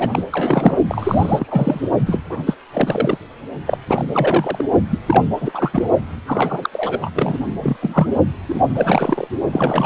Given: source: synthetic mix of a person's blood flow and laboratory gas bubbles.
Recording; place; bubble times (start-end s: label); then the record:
Doppler ultrasound of blood flow; precordium
0.00-0.23 s: bubbles
0.32-0.78 s: bubbles
0.89-1.80 s: bubbles
2.06-2.20 s: bubbles
2.29-2.42 s: bubbles
2.46-2.55 s: bubbles
2.73-3.18 s: bubbles
3.67-3.77 s: bubbles
3.87-4.65 s: bubbles
4.91-4.98 s: bubbles
5.06-5.24 s: bubbles
5.41-5.88 s: bubbles
6.26-6.70 s: bubbles
6.72-7.10 s: bubbles
7.14-7.46 s: bubbles
7.61-7.76 s: bubbles
7.82-8.07 s: bubbles
8.48-8.60 s: bubbles
8.75-9.28 s: bubbles
9.53-9.86 s: bubbles
From the record:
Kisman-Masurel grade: 343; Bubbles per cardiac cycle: rolling drumbeat, 9 or more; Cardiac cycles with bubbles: 100%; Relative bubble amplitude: loud (0.450 to 0.775); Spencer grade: 3 (all of the cardiac periods contain showers or single bubble signals, but not dominating or overriding the cardiac motion signals); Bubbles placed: only in the low amplitude regions of the cardiac cycle